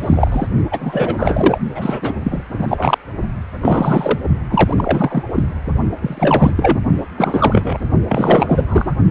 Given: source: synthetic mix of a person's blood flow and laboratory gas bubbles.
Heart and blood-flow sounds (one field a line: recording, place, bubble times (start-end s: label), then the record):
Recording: Doppler ultrasound of blood flow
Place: precordium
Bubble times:
0.00-0.47 s: bubbles
0.71-1.58 s: bubbles
1.75-2.14 s: bubbles
2.24-2.43 s: bubbles
2.54-2.98 s: bubbles
3.61-4.19 s: bubbles
4.49-5.23 s: bubbles
5.35-5.43 s: bubbles
6.01-6.54 s: bubbles
6.56-6.77 s: bubbles
7.16-7.78 s: bubbles
8.08-8.95 s: bubbles
From the record:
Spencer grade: 3 (all of the cardiac periods contain showers or single bubble signals, but not dominating or overriding the cardiac motion signals)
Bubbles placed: only in the low amplitude regions of the cardiac cycle